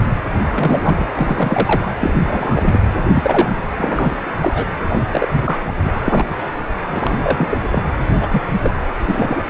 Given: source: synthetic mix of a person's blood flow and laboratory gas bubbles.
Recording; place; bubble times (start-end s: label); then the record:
Doppler ultrasound of blood flow; precordium
0.43-1.07 s: bubbles
1.14-1.85 s: bubbles
2.00-2.79 s: bubbles
3.14-3.48 s: bubbles
3.77-4.15 s: bubbles
4.38-4.66 s: bubbles
4.89-5.03 s: bubbles
5.11-5.28 s: bubbles
5.34-5.76 s: bubbles
5.79-5.91 s: bubbles
6.04-6.34 s: bubbles
6.90-7.58 s: bubbles
7.71-7.83 s: bubbles
8.09-8.17 s: bubbles
8.21-8.42 s: bubbles
8.61-8.74 s: bubbles
8.96-9.43 s: bubbles
From the record:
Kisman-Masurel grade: 243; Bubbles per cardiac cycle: several, 3 to 8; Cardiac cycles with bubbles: 100%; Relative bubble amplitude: loud (0.450 to 0.775); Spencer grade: 3 (all of the cardiac periods contain showers or single bubble signals, but not dominating or overriding the cardiac motion signals); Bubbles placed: anywhere in the cardiac cycle